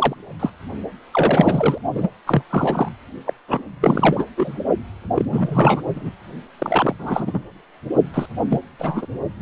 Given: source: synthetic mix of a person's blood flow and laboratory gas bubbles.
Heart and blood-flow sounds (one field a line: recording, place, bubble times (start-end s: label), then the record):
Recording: Doppler ultrasound of blood flow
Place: precordium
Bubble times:
0.00-0.15 s: bubbles
0.40-0.50 s: bubbles
1.11-1.78 s: bubbles
1.95-2.08 s: bubbles
2.27-2.43 s: bubbles
2.50-2.89 s: bubbles
3.26-3.33 s: bubbles
3.48-3.63 s: bubbles
3.81-4.25 s: bubbles
4.37-4.58 s: bubbles
5.15-5.25 s: bubbles
5.29-5.81 s: bubbles
5.96-6.10 s: bubbles
6.58-6.96 s: bubbles
6.98-7.39 s: bubbles
8.13-8.26 s: bubbles
8.49-8.59 s: bubbles
8.79-9.06 s: bubbles
From the record:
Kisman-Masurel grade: 243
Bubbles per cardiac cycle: several, 3 to 8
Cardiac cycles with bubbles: 100%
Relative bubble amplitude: loud (0.450 to 0.775)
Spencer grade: 3 (all of the cardiac periods contain showers or single bubble signals, but not dominating or overriding the cardiac motion signals)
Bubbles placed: only in the low amplitude regions of the cardiac cycle